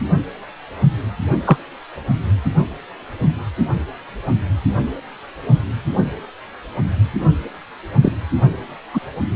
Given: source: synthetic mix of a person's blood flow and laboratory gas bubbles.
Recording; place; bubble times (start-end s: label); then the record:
Doppler ultrasound of blood flow; precordium
1.44-1.56 s: bubbles
8.02-8.12 s: bubbles
8.94-9.00 s: bubbles
From the record:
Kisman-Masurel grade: 123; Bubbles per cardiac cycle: 1 to 2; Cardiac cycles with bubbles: 10 to 50%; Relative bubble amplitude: loud (0.450 to 0.775); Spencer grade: 2 (many but less than half of the cardiac periods contain bubble signals, singularly or in groups); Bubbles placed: only in the low amplitude regions of the cardiac cycle